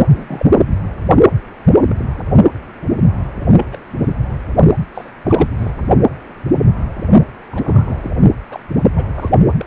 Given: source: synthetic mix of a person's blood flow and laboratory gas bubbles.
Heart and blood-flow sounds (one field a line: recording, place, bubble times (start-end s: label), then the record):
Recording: Doppler ultrasound of blood flow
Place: precordium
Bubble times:
0.08-0.45 s: bubbles
1.89-1.93 s: bubbles
1.97-2.05 s: bubbles
2.18-2.25 s: bubbles
3.57-3.67 s: bubbles
3.71-3.77 s: bubbles
3.99-4.37 s: bubbles
4.95-5.12 s: bubbles
5.24-5.51 s: bubbles
5.58-5.71 s: bubbles
7.50-8.12 s: bubbles
8.50-8.60 s: bubbles
8.95-9.06 s: bubbles
9.14-9.29 s: bubbles
9.59-9.66 s: bubbles
From the record:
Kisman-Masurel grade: 232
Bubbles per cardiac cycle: several, 3 to 8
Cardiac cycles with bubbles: 50 to 99%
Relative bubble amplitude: moderate (0.250 to 0.450)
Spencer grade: 3 (all of the cardiac periods contain showers or single bubble signals, but not dominating or overriding the cardiac motion signals)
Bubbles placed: only in the low amplitude regions of the cardiac cycle